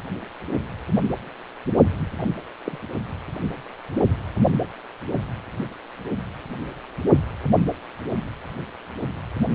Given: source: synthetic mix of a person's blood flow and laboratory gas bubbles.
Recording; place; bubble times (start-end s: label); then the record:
Doppler ultrasound of blood flow; precordium
2.18-2.24 s: bubbles
2.65-2.78 s: bubbles
From the record:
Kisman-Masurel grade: 111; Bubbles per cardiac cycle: 1 to 2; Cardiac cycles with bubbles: 1 to 10%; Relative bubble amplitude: barely perceptible (0.100 to 0.250); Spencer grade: 1 (occasional bubble signal discernible with the cardiac motion signal, with majority of cardiac periods free of bubbles); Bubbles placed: only in the low amplitude regions of the cardiac cycle